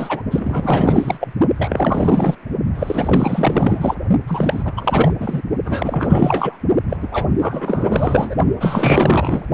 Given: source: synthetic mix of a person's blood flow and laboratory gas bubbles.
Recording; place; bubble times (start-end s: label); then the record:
Doppler ultrasound of blood flow; precordium
0.00-0.23 s: bubbles
0.31-1.33 s: bubbles
1.55-2.35 s: bubbles
2.75-3.95 s: bubbles
4.27-4.72 s: bubbles
4.76-5.13 s: bubbles
5.19-5.42 s: bubbles
5.65-6.57 s: bubbles
6.89-6.97 s: bubbles
7.00-7.09 s: bubbles
7.11-7.25 s: bubbles
7.40-8.35 s: bubbles
8.60-9.45 s: bubbles
From the record:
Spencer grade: 4 (maximum detectable bubble signal sounding continuously throughout systole and diastole of every cardiac period, and overriding the amplitude of the normal cardiac signals); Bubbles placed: only in the low amplitude regions of the cardiac cycle